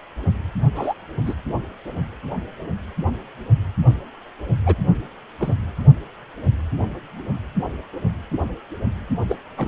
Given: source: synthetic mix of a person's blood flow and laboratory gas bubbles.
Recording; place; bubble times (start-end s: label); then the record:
Doppler ultrasound of blood flow; precordium
0.75-0.94 s: bubbles
1.26-1.34 s: bubbles
4.66-4.75 s: bubbles
5.38-5.54 s: bubbles
9.29-9.36 s: bubbles
9.57-9.68 s: bubbles
From the record:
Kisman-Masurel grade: 122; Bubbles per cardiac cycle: 1 to 2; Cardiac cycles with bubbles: 10 to 50%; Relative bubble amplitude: moderate (0.250 to 0.450); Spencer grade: 2 (many but less than half of the cardiac periods contain bubble signals, singularly or in groups); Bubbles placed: only in the low amplitude regions of the cardiac cycle